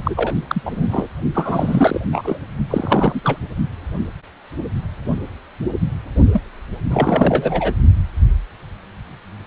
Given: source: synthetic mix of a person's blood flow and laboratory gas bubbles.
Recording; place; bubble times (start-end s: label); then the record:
Doppler ultrasound of blood flow; precordium
0.04-0.34 s: bubbles
0.47-0.61 s: bubbles
0.65-1.07 s: bubbles
1.34-1.99 s: bubbles
2.12-2.39 s: bubbles
2.70-3.21 s: bubbles
3.24-3.38 s: bubbles
6.33-6.41 s: bubbles
6.90-7.75 s: bubbles
From the record:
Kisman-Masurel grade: 333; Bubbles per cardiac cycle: rolling drumbeat, 9 or more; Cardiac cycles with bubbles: 50 to 99%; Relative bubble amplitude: loud (0.450 to 0.775); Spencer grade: 3 (all of the cardiac periods contain showers or single bubble signals, but not dominating or overriding the cardiac motion signals); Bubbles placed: only in the low amplitude regions of the cardiac cycle